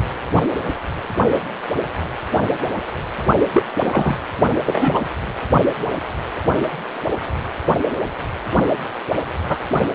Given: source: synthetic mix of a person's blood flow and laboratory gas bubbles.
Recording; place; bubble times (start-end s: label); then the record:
Doppler ultrasound of blood flow; precordium
2.31-2.38 s: bubbles
3.54-3.63 s: bubbles
3.81-4.16 s: bubbles
4.66-5.01 s: bubbles
9.48-9.58 s: bubbles
From the record:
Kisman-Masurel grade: 123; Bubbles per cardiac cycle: 1 to 2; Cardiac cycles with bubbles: 10 to 50%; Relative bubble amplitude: loud (0.450 to 0.775); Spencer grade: 2 (many but less than half of the cardiac periods contain bubble signals, singularly or in groups); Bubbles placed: anywhere in the cardiac cycle